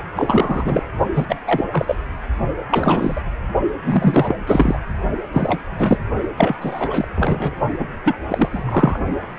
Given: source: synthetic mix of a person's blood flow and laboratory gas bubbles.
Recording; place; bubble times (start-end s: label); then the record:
Doppler ultrasound of blood flow; precordium
0.16-0.83 s: bubbles
1.15-1.26 s: bubbles
1.28-1.35 s: bubbles
1.47-1.65 s: bubbles
1.73-1.95 s: bubbles
2.69-3.21 s: bubbles
3.84-4.35 s: bubbles
4.47-4.78 s: bubbles
5.32-5.59 s: bubbles
5.79-5.97 s: bubbles
6.37-6.55 s: bubbles
6.61-7.08 s: bubbles
7.15-7.54 s: bubbles
7.79-7.84 s: bubbles
8.04-8.15 s: bubbles
8.28-8.49 s: bubbles
8.53-8.99 s: bubbles
From the record:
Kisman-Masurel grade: 333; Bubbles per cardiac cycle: rolling drumbeat, 9 or more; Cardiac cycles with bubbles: 50 to 99%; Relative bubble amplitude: loud (0.450 to 0.775); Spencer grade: 3 (all of the cardiac periods contain showers or single bubble signals, but not dominating or overriding the cardiac motion signals); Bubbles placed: only in the low amplitude regions of the cardiac cycle